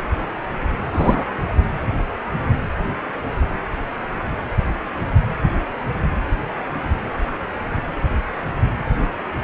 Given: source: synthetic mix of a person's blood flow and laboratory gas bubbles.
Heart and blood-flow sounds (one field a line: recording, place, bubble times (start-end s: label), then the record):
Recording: Doppler ultrasound of blood flow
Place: precordium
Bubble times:
0.93-1.26 s: bubbles
1.49-1.54 s: bubbles
From the record:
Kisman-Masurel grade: 222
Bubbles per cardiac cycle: several, 3 to 8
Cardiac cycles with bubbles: 10 to 50%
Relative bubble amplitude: moderate (0.250 to 0.450)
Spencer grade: 2 (many but less than half of the cardiac periods contain bubble signals, singularly or in groups)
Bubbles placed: anywhere in the cardiac cycle